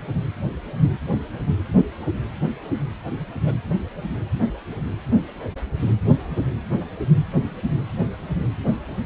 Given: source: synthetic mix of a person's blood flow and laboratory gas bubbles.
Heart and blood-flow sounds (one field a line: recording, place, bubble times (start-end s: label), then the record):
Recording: Doppler ultrasound of blood flow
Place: precordium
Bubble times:
3.40-3.56 s: bubbles
From the record:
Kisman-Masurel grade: 211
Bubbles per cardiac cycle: several, 3 to 8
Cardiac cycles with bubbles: 1 to 10%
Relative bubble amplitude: barely perceptible (0.100 to 0.250)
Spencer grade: 1 (occasional bubble signal discernible with the cardiac motion signal, with majority of cardiac periods free of bubbles)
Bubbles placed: anywhere in the cardiac cycle